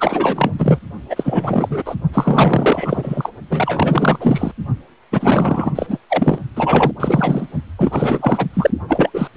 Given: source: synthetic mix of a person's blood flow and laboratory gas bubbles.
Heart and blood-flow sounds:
Doppler ultrasound of blood flow; precordium
0.00-0.52 s: bubbles
0.58-0.79 s: bubbles
1.09-1.96 s: bubbles
2.12-3.29 s: bubbles
3.50-4.51 s: bubbles
5.12-5.72 s: bubbles
5.75-5.98 s: bubbles
6.09-6.38 s: bubbles
6.56-6.92 s: bubbles
7.00-7.47 s: bubbles
7.77-8.47 s: bubbles
8.54-8.71 s: bubbles
8.88-9.10 s: bubbles
9.13-9.28 s: bubbles
From the record:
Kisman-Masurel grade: 444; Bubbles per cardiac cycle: continuous sound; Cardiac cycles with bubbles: 100%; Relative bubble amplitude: maximal (0.775 to 0.999); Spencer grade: 4 (maximum detectable bubble signal sounding continuously throughout systole and diastole of every cardiac period, and overriding the amplitude of the normal cardiac signals); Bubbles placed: only in the low amplitude regions of the cardiac cycle

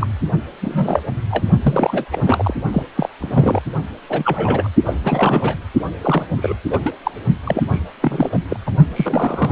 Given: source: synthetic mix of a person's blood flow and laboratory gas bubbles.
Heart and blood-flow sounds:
Doppler ultrasound of blood flow; precordium
0.00-0.07 s: bubbles
0.61-1.01 s: bubbles
1.30-1.45 s: bubbles
1.62-2.05 s: bubbles
2.11-2.54 s: bubbles
2.73-2.83 s: bubbles
2.97-3.08 s: bubbles
3.20-3.60 s: bubbles
4.09-4.69 s: bubbles
4.86-4.95 s: bubbles
5.04-5.57 s: bubbles
6.04-6.25 s: bubbles
6.37-6.59 s: bubbles
6.70-6.79 s: bubbles
6.83-6.96 s: bubbles
7.03-7.11 s: bubbles
7.44-7.62 s: bubbles
7.72-7.80 s: bubbles
8.02-8.39 s: bubbles
8.50-8.57 s: bubbles
8.66-8.71 s: bubbles
8.96-9.52 s: bubbles
From the record:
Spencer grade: 3 (all of the cardiac periods contain showers or single bubble signals, but not dominating or overriding the cardiac motion signals); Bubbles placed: only in the low amplitude regions of the cardiac cycle

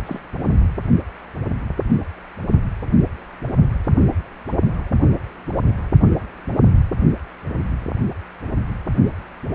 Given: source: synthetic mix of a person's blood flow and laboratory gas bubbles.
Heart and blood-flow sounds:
Doppler ultrasound of blood flow; precordium
0.05-0.20 s: bubbles
From the record:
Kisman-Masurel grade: 111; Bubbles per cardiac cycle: 1 to 2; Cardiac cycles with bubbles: 1 to 10%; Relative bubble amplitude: barely perceptible (0.100 to 0.250); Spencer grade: 1 (occasional bubble signal discernible with the cardiac motion signal, with majority of cardiac periods free of bubbles); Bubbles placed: only in the low amplitude regions of the cardiac cycle

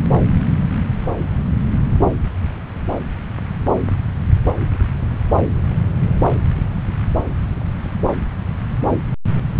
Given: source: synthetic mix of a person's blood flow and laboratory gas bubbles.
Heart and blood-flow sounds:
Doppler ultrasound of blood flow; subclavian vein
no bubbles
From the record:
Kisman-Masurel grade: 000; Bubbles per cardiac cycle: 0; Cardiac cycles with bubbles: 0%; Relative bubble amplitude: no bubbles discernible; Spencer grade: 0 (complete lack of bubble signals)

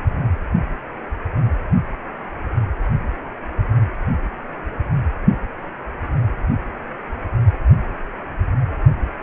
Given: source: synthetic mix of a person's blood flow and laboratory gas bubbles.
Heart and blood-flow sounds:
Doppler ultrasound of blood flow; precordium
no bubbles
From the record:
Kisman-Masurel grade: 000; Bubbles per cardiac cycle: 0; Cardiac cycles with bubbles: 0%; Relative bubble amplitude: no bubbles discernible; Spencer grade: 0 (complete lack of bubble signals)

